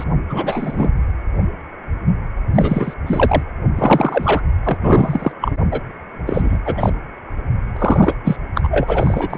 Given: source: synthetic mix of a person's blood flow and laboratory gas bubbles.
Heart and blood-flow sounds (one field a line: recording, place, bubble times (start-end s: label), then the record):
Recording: Doppler ultrasound of blood flow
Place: precordium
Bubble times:
0.00-0.04 s: bubbles
0.29-0.89 s: bubbles
2.54-2.94 s: bubbles
3.06-3.43 s: bubbles
3.75-4.42 s: bubbles
4.63-4.78 s: bubbles
4.81-5.32 s: bubbles
5.40-5.52 s: bubbles
5.71-5.80 s: bubbles
6.26-6.58 s: bubbles
6.64-6.91 s: bubbles
7.75-8.14 s: bubbles
8.24-8.37 s: bubbles
8.55-9.38 s: bubbles
From the record:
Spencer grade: 3 (all of the cardiac periods contain showers or single bubble signals, but not dominating or overriding the cardiac motion signals)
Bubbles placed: anywhere in the cardiac cycle